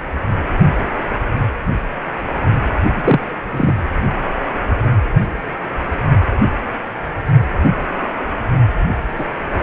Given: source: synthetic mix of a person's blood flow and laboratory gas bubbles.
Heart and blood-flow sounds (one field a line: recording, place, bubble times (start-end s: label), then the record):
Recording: Doppler ultrasound of blood flow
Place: precordium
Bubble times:
2.90-3.27 s: bubbles
3.50-3.74 s: bubbles
9.18-9.25 s: bubbles
From the record:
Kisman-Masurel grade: 123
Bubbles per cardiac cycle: 1 to 2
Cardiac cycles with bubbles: 10 to 50%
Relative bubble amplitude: loud (0.450 to 0.775)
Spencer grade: 2 (many but less than half of the cardiac periods contain bubble signals, singularly or in groups)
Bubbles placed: anywhere in the cardiac cycle